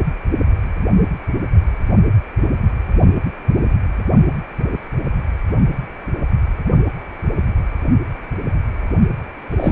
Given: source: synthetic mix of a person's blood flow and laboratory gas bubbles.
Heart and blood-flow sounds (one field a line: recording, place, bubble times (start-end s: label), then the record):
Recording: Doppler ultrasound of blood flow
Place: precordium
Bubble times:
9.50-9.72 s: bubbles
From the record:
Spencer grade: 1 (occasional bubble signal discernible with the cardiac motion signal, with majority of cardiac periods free of bubbles)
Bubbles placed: only in the low amplitude regions of the cardiac cycle